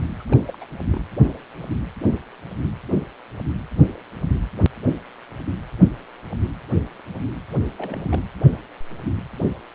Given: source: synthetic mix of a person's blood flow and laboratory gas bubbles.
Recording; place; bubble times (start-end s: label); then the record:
Doppler ultrasound of blood flow; precordium
0.19-0.23 s: bubbles
0.26-0.37 s: bubbles
0.47-0.65 s: bubbles
0.92-1.01 s: bubbles
7.50-7.58 s: bubbles
7.77-8.23 s: bubbles
From the record:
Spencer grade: 2 (many but less than half of the cardiac periods contain bubble signals, singularly or in groups); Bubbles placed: anywhere in the cardiac cycle